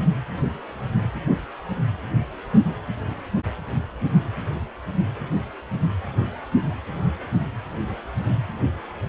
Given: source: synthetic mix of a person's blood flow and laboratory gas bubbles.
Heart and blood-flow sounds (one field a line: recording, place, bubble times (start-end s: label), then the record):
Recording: Doppler ultrasound of blood flow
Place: precordium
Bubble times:
no bubbles
From the record:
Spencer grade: 0 (complete lack of bubble signals)